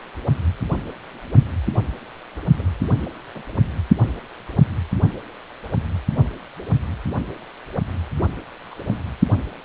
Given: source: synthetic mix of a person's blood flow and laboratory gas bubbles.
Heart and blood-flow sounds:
Doppler ultrasound of blood flow; precordium
2.58-2.62 s: bubbles
3.34-3.42 s: bubbles
4.08-4.15 s: bubbles
8.71-8.74 s: bubbles
From the record:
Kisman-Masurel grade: 121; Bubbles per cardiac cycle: 1 to 2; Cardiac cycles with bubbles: 10 to 50%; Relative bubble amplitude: barely perceptible (0.100 to 0.250); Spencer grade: 2 (many but less than half of the cardiac periods contain bubble signals, singularly or in groups); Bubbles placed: only in the low amplitude regions of the cardiac cycle

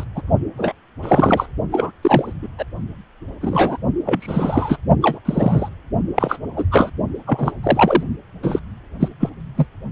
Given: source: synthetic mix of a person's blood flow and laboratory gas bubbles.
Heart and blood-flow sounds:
Doppler ultrasound of blood flow; precordium
0.00-0.04 s: bubbles
0.15-0.22 s: bubbles
0.57-0.72 s: bubbles
1.02-1.49 s: bubbles
1.72-1.91 s: bubbles
2.03-2.33 s: bubbles
2.42-2.48 s: bubbles
2.58-2.65 s: bubbles
3.41-3.78 s: bubbles
4.05-4.78 s: bubbles
5.02-5.19 s: bubbles
5.25-5.69 s: bubbles
6.16-6.39 s: bubbles
6.56-6.66 s: bubbles
6.71-6.91 s: bubbles
7.26-7.53 s: bubbles
7.63-8.03 s: bubbles
8.42-8.59 s: bubbles
9.00-9.08 s: bubbles
9.19-9.29 s: bubbles
9.56-9.66 s: bubbles
From the record:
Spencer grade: 3 (all of the cardiac periods contain showers or single bubble signals, but not dominating or overriding the cardiac motion signals); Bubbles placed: only in the low amplitude regions of the cardiac cycle

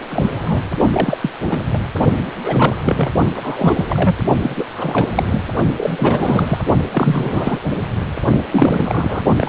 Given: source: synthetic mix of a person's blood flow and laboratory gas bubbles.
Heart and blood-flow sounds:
Doppler ultrasound of blood flow; precordium
0.00-0.02 s: bubbles
0.10-0.64 s: bubbles
0.79-0.90 s: bubbles
0.92-1.18 s: bubbles
1.21-1.30 s: bubbles
1.49-1.67 s: bubbles
1.73-1.79 s: bubbles
2.18-2.23 s: bubbles
2.44-2.75 s: bubbles
2.85-3.10 s: bubbles
3.35-4.16 s: bubbles
4.42-4.64 s: bubbles
4.72-5.47 s: bubbles
5.77-6.62 s: bubbles
6.93-7.60 s: bubbles
8.51-9.22 s: bubbles
9.37-9.49 s: bubbles
From the record:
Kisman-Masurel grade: 342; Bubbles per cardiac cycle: rolling drumbeat, 9 or more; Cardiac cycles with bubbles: 100%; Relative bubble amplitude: moderate (0.250 to 0.450); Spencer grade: 3 (all of the cardiac periods contain showers or single bubble signals, but not dominating or overriding the cardiac motion signals); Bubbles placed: only in the low amplitude regions of the cardiac cycle

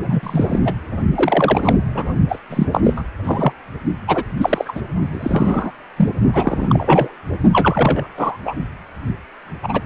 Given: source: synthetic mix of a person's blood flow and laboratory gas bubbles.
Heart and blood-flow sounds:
Doppler ultrasound of blood flow; precordium
0.04-0.20 s: bubbles
0.23-0.59 s: bubbles
0.65-0.74 s: bubbles
1.15-1.75 s: bubbles
1.95-2.13 s: bubbles
2.28-2.39 s: bubbles
2.49-2.66 s: bubbles
2.73-2.81 s: bubbles
2.84-3.02 s: bubbles
3.23-3.52 s: bubbles
4.07-4.24 s: bubbles
4.37-4.82 s: bubbles
5.10-5.72 s: bubbles
5.96-6.10 s: bubbles
6.33-7.16 s: bubbles
7.52-8.07 s: bubbles
8.17-8.37 s: bubbles
8.45-8.54 s: bubbles
9.62-9.81 s: bubbles
From the record:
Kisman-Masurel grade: 243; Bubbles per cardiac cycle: several, 3 to 8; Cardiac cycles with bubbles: 100%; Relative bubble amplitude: loud (0.450 to 0.775); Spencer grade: 3 (all of the cardiac periods contain showers or single bubble signals, but not dominating or overriding the cardiac motion signals); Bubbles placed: only in the low amplitude regions of the cardiac cycle

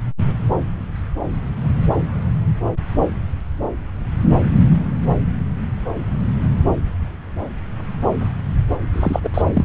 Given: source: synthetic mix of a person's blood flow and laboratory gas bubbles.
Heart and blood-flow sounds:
Doppler ultrasound of blood flow; subclavian vein
8.93-9.20 s: bubbles
9.23-9.29 s: bubbles
9.34-9.42 s: bubbles
9.54-9.65 s: bubbles
From the record:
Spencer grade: 2 (many but less than half of the cardiac periods contain bubble signals, singularly or in groups); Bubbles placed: anywhere in the cardiac cycle

